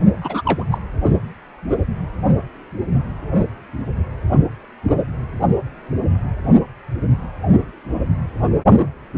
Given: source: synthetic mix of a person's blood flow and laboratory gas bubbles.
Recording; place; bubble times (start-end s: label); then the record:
Doppler ultrasound of blood flow; precordium
0.21-0.42 s: bubbles
0.45-0.65 s: bubbles
0.71-0.78 s: bubbles
From the record:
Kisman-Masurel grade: 212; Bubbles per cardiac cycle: several, 3 to 8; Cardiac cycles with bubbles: 1 to 10%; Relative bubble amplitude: moderate (0.250 to 0.450); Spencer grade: 1 (occasional bubble signal discernible with the cardiac motion signal, with majority of cardiac periods free of bubbles); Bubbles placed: only in the low amplitude regions of the cardiac cycle